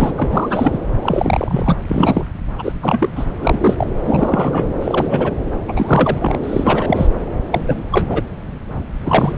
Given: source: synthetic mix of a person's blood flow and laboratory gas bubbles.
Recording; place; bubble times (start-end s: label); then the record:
Doppler ultrasound of blood flow; subclavian vein
0.00-0.13 s: bubbles
0.17-0.78 s: bubbles
1.02-1.76 s: bubbles
1.89-2.25 s: bubbles
2.58-2.73 s: bubbles
2.81-3.10 s: bubbles
3.15-3.25 s: bubbles
3.35-3.75 s: bubbles
3.78-3.92 s: bubbles
4.05-4.68 s: bubbles
4.81-5.32 s: bubbles
5.68-5.73 s: bubbles
5.75-6.38 s: bubbles
6.43-7.07 s: bubbles
7.51-7.83 s: bubbles
7.91-8.22 s: bubbles
9.02-9.38 s: bubbles
From the record:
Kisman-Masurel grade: 333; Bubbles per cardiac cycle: rolling drumbeat, 9 or more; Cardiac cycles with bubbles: 50 to 99%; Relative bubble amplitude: loud (0.450 to 0.775); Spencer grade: 3 (all of the cardiac periods contain showers or single bubble signals, but not dominating or overriding the cardiac motion signals); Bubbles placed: anywhere in the cardiac cycle